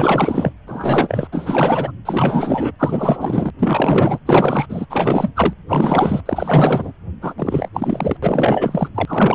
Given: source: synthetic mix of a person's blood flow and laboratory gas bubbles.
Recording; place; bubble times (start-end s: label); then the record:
Doppler ultrasound of blood flow; precordium
0.00-0.53 s: bubbles
0.67-1.27 s: bubbles
1.31-1.92 s: bubbles
2.05-2.71 s: bubbles
2.79-3.50 s: bubbles
3.59-4.19 s: bubbles
4.25-4.66 s: bubbles
4.69-4.86 s: bubbles
4.89-5.30 s: bubbles
5.36-5.54 s: bubbles
5.69-6.21 s: bubbles
6.26-6.92 s: bubbles
7.21-7.34 s: bubbles
7.38-7.69 s: bubbles
7.74-8.17 s: bubbles
8.22-8.88 s: bubbles
8.94-9.35 s: bubbles
From the record:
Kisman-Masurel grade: 444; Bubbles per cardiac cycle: continuous sound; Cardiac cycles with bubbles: 100%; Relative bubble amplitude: maximal (0.775 to 0.999); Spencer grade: 4 (maximum detectable bubble signal sounding continuously throughout systole and diastole of every cardiac period, and overriding the amplitude of the normal cardiac signals); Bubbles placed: anywhere in the cardiac cycle